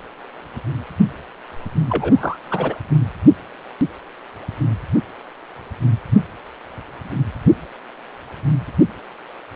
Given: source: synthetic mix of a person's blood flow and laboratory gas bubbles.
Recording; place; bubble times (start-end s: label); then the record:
Doppler ultrasound of blood flow; precordium
1.89-2.76 s: bubbles
From the record:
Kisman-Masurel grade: 212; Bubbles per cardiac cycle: several, 3 to 8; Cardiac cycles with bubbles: 1 to 10%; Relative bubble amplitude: moderate (0.250 to 0.450); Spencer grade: 1 (occasional bubble signal discernible with the cardiac motion signal, with majority of cardiac periods free of bubbles); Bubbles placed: only in the low amplitude regions of the cardiac cycle